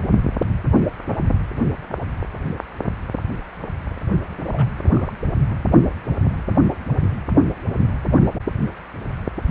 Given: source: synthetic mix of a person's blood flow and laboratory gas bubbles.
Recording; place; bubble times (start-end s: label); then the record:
Doppler ultrasound of blood flow; precordium
4.46-4.68 s: bubbles
4.85-5.12 s: bubbles
5.50-5.56 s: bubbles
From the record:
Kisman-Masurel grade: 211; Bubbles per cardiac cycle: several, 3 to 8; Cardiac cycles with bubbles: 1 to 10%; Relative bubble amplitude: barely perceptible (0.100 to 0.250); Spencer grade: 1 (occasional bubble signal discernible with the cardiac motion signal, with majority of cardiac periods free of bubbles); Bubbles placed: only in the low amplitude regions of the cardiac cycle